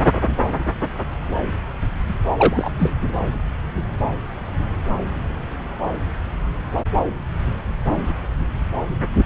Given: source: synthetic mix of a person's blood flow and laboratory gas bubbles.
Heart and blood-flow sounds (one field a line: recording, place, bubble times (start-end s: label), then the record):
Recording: Doppler ultrasound of blood flow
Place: subclavian vein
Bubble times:
2.29-2.33 s: bubbles
2.37-2.70 s: bubbles
2.79-2.94 s: bubbles
From the record:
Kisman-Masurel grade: 212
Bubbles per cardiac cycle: several, 3 to 8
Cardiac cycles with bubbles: 1 to 10%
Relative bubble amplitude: moderate (0.250 to 0.450)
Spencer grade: 1 (occasional bubble signal discernible with the cardiac motion signal, with majority of cardiac periods free of bubbles)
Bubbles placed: anywhere in the cardiac cycle